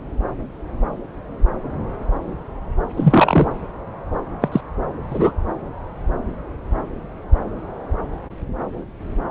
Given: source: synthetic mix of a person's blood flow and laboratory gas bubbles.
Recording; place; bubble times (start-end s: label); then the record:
Doppler ultrasound of blood flow; subclavian vein
2.96-3.48 s: bubbles
4.41-4.49 s: bubbles
4.52-4.61 s: bubbles
5.10-5.33 s: bubbles
From the record:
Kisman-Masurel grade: 123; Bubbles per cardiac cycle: 1 to 2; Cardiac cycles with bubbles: 10 to 50%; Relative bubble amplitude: loud (0.450 to 0.775); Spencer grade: 2 (many but less than half of the cardiac periods contain bubble signals, singularly or in groups); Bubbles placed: anywhere in the cardiac cycle